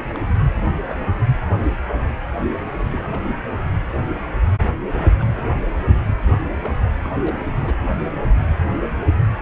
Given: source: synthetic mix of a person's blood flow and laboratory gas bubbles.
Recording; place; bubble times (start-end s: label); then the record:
Doppler ultrasound of blood flow; precordium
0.07-0.19 s: bubbles
0.65-0.75 s: bubbles
0.85-0.98 s: bubbles
2.75-3.36 s: bubbles
4.96-5.59 s: bubbles
5.73-5.81 s: bubbles
6.06-6.12 s: bubbles
6.28-6.76 s: bubbles
7.03-7.17 s: bubbles
7.26-7.42 s: bubbles
7.56-7.75 s: bubbles
From the record:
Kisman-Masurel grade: 221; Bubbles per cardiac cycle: several, 3 to 8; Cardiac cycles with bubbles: 10 to 50%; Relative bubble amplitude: barely perceptible (0.100 to 0.250); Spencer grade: 2 (many but less than half of the cardiac periods contain bubble signals, singularly or in groups); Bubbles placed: anywhere in the cardiac cycle